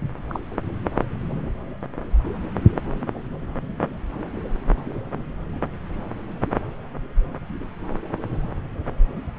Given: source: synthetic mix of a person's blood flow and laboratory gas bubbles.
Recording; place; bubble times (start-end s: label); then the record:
Doppler ultrasound of blood flow; subclavian vein
0.29-0.40 s: bubbles
From the record:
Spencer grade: 1 (occasional bubble signal discernible with the cardiac motion signal, with majority of cardiac periods free of bubbles); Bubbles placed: anywhere in the cardiac cycle